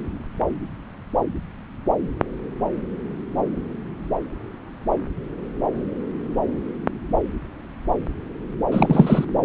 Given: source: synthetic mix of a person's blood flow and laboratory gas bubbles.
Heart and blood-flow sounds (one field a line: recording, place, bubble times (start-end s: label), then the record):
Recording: Doppler ultrasound of blood flow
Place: subclavian vein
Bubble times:
8.71-9.25 s: bubbles
From the record:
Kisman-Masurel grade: 223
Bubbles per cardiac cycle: several, 3 to 8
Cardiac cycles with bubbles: 10 to 50%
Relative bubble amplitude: loud (0.450 to 0.775)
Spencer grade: 2 (many but less than half of the cardiac periods contain bubble signals, singularly or in groups)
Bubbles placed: anywhere in the cardiac cycle